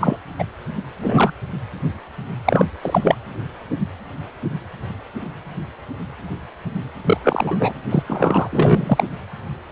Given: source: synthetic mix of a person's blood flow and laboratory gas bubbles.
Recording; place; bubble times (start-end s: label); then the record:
Doppler ultrasound of blood flow; precordium
0.00-0.17 s: bubbles
0.38-0.45 s: bubbles
1.02-1.33 s: bubbles
2.44-2.65 s: bubbles
2.81-3.15 s: bubbles
7.04-7.18 s: bubbles
7.23-7.57 s: bubbles
7.59-7.74 s: bubbles
7.89-8.03 s: bubbles
8.06-8.47 s: bubbles
8.52-9.04 s: bubbles
From the record:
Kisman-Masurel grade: 233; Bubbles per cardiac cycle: several, 3 to 8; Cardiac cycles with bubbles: 50 to 99%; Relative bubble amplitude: loud (0.450 to 0.775); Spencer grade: 3 (all of the cardiac periods contain showers or single bubble signals, but not dominating or overriding the cardiac motion signals); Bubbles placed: anywhere in the cardiac cycle